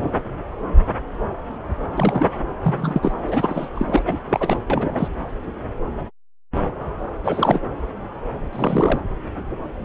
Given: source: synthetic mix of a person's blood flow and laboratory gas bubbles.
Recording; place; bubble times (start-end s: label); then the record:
Doppler ultrasound of blood flow; subclavian vein
1.96-2.40 s: bubbles
2.62-3.12 s: bubbles
3.27-3.69 s: bubbles
3.75-4.02 s: bubbles
4.06-4.19 s: bubbles
4.25-4.57 s: bubbles
4.70-5.08 s: bubbles
7.24-7.60 s: bubbles
8.53-9.00 s: bubbles
From the record:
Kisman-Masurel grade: 233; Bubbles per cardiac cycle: several, 3 to 8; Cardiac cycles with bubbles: 50 to 99%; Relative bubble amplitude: loud (0.450 to 0.775); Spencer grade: 3 (all of the cardiac periods contain showers or single bubble signals, but not dominating or overriding the cardiac motion signals); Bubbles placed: anywhere in the cardiac cycle